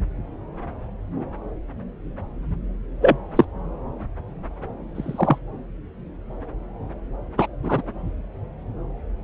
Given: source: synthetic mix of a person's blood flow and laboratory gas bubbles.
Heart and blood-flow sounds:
Doppler ultrasound of blood flow; subclavian vein
3.01-3.17 s: bubbles
3.35-3.45 s: bubbles
4.95-5.38 s: bubbles
7.38-7.46 s: bubbles
7.63-7.82 s: bubbles
From the record:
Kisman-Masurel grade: 123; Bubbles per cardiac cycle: 1 to 2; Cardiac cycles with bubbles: 10 to 50%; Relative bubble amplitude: loud (0.450 to 0.775); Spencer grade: 2 (many but less than half of the cardiac periods contain bubble signals, singularly or in groups); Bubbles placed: anywhere in the cardiac cycle

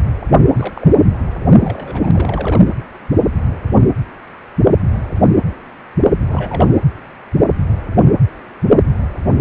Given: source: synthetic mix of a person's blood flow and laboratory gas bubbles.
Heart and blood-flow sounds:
Doppler ultrasound of blood flow; precordium
0.54-1.03 s: bubbles
1.55-2.60 s: bubbles
6.28-6.79 s: bubbles
From the record:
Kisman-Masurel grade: 221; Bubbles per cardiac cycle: several, 3 to 8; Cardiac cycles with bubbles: 10 to 50%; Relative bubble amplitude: barely perceptible (0.100 to 0.250); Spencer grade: 2 (many but less than half of the cardiac periods contain bubble signals, singularly or in groups); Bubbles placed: anywhere in the cardiac cycle

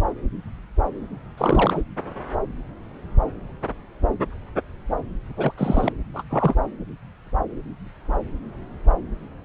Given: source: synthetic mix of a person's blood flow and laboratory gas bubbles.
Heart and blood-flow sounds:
Doppler ultrasound of blood flow; subclavian vein
1.38-1.83 s: bubbles
5.36-5.52 s: bubbles
5.57-5.92 s: bubbles
6.14-6.23 s: bubbles
6.29-6.54 s: bubbles
From the record:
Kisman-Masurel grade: 222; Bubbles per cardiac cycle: several, 3 to 8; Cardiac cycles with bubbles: 10 to 50%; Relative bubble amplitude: moderate (0.250 to 0.450); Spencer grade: 2 (many but less than half of the cardiac periods contain bubble signals, singularly or in groups); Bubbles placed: anywhere in the cardiac cycle

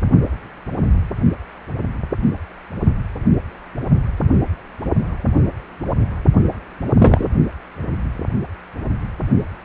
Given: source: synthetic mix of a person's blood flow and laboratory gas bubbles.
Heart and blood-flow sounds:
Doppler ultrasound of blood flow; precordium
6.99-7.29 s: bubbles
From the record:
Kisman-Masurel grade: 213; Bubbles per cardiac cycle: several, 3 to 8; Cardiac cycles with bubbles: 1 to 10%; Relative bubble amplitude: loud (0.450 to 0.775); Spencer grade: 1 (occasional bubble signal discernible with the cardiac motion signal, with majority of cardiac periods free of bubbles); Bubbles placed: only in the low amplitude regions of the cardiac cycle

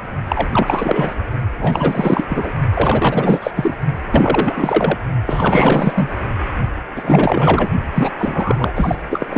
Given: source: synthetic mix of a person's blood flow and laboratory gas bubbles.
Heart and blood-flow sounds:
Doppler ultrasound of blood flow; precordium
0.00-0.08 s: bubbles
0.28-0.48 s: bubbles
0.51-1.15 s: bubbles
1.57-2.26 s: bubbles
2.29-2.53 s: bubbles
2.75-3.51 s: bubbles
3.55-3.75 s: bubbles
4.11-4.97 s: bubbles
5.26-6.09 s: bubbles
6.96-7.68 s: bubbles
7.94-8.12 s: bubbles
8.18-8.72 s: bubbles
8.75-8.95 s: bubbles
9.10-9.26 s: bubbles
9.29-9.38 s: bubbles
From the record:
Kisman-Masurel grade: 444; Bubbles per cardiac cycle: continuous sound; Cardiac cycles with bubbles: 100%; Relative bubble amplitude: maximal (0.775 to 0.999); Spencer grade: 4 (maximum detectable bubble signal sounding continuously throughout systole and diastole of every cardiac period, and overriding the amplitude of the normal cardiac signals); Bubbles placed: only in the low amplitude regions of the cardiac cycle

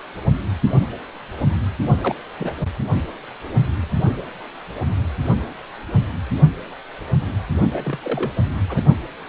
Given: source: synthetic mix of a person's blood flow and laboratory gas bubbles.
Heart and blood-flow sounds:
Doppler ultrasound of blood flow; precordium
1.98-2.15 s: bubbles
2.38-2.53 s: bubbles
7.72-7.98 s: bubbles
8.03-8.32 s: bubbles
8.69-8.83 s: bubbles
From the record:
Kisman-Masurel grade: 221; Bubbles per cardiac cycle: several, 3 to 8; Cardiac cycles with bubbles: 10 to 50%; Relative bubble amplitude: barely perceptible (0.100 to 0.250); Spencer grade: 2 (many but less than half of the cardiac periods contain bubble signals, singularly or in groups); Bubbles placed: only in the low amplitude regions of the cardiac cycle

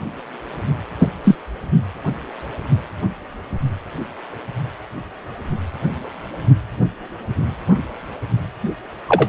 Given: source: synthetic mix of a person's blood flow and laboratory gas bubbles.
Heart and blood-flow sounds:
Doppler ultrasound of blood flow; precordium
0.99-1.08 s: bubbles
1.24-1.35 s: bubbles
9.09-9.29 s: bubbles
From the record:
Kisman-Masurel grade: 123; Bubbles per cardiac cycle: 1 to 2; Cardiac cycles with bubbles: 10 to 50%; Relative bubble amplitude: loud (0.450 to 0.775); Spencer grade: 2 (many but less than half of the cardiac periods contain bubble signals, singularly or in groups); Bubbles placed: only in the low amplitude regions of the cardiac cycle

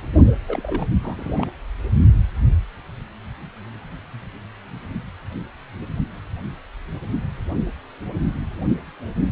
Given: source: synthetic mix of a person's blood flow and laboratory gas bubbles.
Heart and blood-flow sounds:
Doppler ultrasound of blood flow; precordium
0.47-0.87 s: bubbles
1.01-1.50 s: bubbles
From the record:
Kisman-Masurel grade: 222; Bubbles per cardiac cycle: several, 3 to 8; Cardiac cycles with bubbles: 10 to 50%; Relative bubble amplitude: moderate (0.250 to 0.450); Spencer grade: 2 (many but less than half of the cardiac periods contain bubble signals, singularly or in groups); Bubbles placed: only in the low amplitude regions of the cardiac cycle

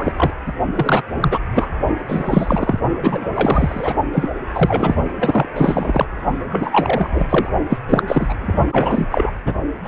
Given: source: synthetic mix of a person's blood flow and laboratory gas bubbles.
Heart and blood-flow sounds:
Doppler ultrasound of blood flow; precordium
0.00-0.13 s: bubbles
0.16-0.30 s: bubbles
0.46-0.53 s: bubbles
0.74-1.03 s: bubbles
1.14-1.39 s: bubbles
1.54-1.67 s: bubbles
2.08-2.80 s: bubbles
3.02-3.29 s: bubbles
3.34-3.94 s: bubbles
4.12-4.29 s: bubbles
4.54-4.96 s: bubbles
5.19-5.47 s: bubbles
5.56-6.05 s: bubbles
6.50-7.49 s: bubbles
7.69-7.80 s: bubbles
7.88-8.03 s: bubbles
8.07-8.53 s: bubbles
8.71-9.06 s: bubbles
9.11-9.30 s: bubbles
9.45-9.54 s: bubbles
9.83-9.88 s: bubbles
From the record:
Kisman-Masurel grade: 343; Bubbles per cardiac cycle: rolling drumbeat, 9 or more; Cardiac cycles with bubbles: 100%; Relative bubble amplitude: loud (0.450 to 0.775); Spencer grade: 3 (all of the cardiac periods contain showers or single bubble signals, but not dominating or overriding the cardiac motion signals); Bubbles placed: only in the low amplitude regions of the cardiac cycle

